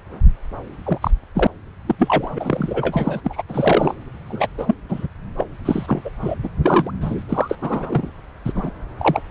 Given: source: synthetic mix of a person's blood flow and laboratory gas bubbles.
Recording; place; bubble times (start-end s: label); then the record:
Doppler ultrasound of blood flow; subclavian vein
0.84-0.98 s: bubbles
1.01-1.11 s: bubbles
1.34-1.47 s: bubbles
1.87-1.95 s: bubbles
1.98-3.21 s: bubbles
3.23-3.42 s: bubbles
3.48-3.95 s: bubbles
4.28-4.47 s: bubbles
4.58-4.75 s: bubbles
4.89-5.07 s: bubbles
5.38-5.46 s: bubbles
5.65-6.02 s: bubbles
6.04-6.10 s: bubbles
6.22-6.36 s: bubbles
6.43-6.49 s: bubbles
6.63-6.91 s: bubbles
7.01-7.24 s: bubbles
7.29-7.56 s: bubbles
7.61-8.09 s: bubbles
8.45-8.70 s: bubbles
8.97-9.22 s: bubbles
From the record:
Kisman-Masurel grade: 242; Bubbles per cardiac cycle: several, 3 to 8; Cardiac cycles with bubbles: 100%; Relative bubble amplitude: moderate (0.250 to 0.450); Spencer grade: 3 (all of the cardiac periods contain showers or single bubble signals, but not dominating or overriding the cardiac motion signals); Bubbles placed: anywhere in the cardiac cycle